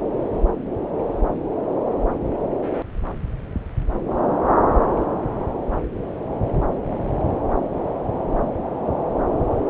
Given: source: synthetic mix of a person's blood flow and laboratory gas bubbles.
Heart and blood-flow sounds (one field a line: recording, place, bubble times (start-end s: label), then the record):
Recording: Doppler ultrasound of blood flow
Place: subclavian vein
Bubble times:
no bubbles
From the record:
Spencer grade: 0 (complete lack of bubble signals)